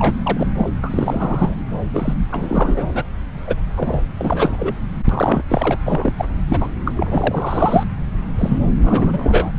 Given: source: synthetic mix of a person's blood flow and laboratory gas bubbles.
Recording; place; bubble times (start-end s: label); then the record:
Doppler ultrasound of blood flow; subclavian vein
0.00-0.12 s: bubbles
0.23-0.52 s: bubbles
0.57-0.70 s: bubbles
0.82-1.56 s: bubbles
1.94-2.13 s: bubbles
2.31-3.04 s: bubbles
3.47-3.56 s: bubbles
3.76-4.01 s: bubbles
4.18-4.75 s: bubbles
5.09-5.42 s: bubbles
5.48-5.77 s: bubbles
5.85-6.15 s: bubbles
6.18-6.25 s: bubbles
6.49-6.69 s: bubbles
6.85-6.92 s: bubbles
6.96-7.84 s: bubbles
8.38-8.59 s: bubbles
8.82-9.51 s: bubbles
From the record:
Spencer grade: 3 (all of the cardiac periods contain showers or single bubble signals, but not dominating or overriding the cardiac motion signals); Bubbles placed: anywhere in the cardiac cycle